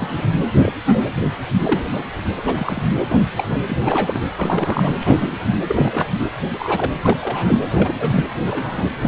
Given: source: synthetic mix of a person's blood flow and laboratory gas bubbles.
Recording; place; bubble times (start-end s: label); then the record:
Doppler ultrasound of blood flow; precordium
0.00-0.27 s: bubbles
0.62-0.73 s: bubbles
0.85-1.01 s: bubbles
1.63-1.84 s: bubbles
1.93-2.04 s: bubbles
2.37-2.41 s: bubbles
2.46-2.83 s: bubbles
3.10-3.19 s: bubbles
3.37-3.44 s: bubbles
3.49-3.58 s: bubbles
3.67-3.77 s: bubbles
3.79-4.21 s: bubbles
4.36-4.94 s: bubbles
4.99-5.46 s: bubbles
5.67-6.14 s: bubbles
6.54-6.92 s: bubbles
7.02-7.17 s: bubbles
7.21-7.57 s: bubbles
7.70-8.25 s: bubbles
8.45-8.88 s: bubbles
9.01-9.08 s: bubbles
From the record:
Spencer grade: 3 (all of the cardiac periods contain showers or single bubble signals, but not dominating or overriding the cardiac motion signals); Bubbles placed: anywhere in the cardiac cycle